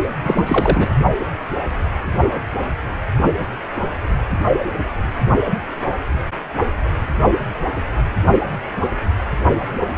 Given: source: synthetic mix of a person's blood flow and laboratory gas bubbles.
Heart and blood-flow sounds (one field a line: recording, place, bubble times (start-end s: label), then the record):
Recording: Doppler ultrasound of blood flow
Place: precordium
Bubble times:
0.24-0.87 s: bubbles
From the record:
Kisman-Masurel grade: 213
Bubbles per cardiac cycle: several, 3 to 8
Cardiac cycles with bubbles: 1 to 10%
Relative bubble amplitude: loud (0.450 to 0.775)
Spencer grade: 1 (occasional bubble signal discernible with the cardiac motion signal, with majority of cardiac periods free of bubbles)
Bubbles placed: only in the low amplitude regions of the cardiac cycle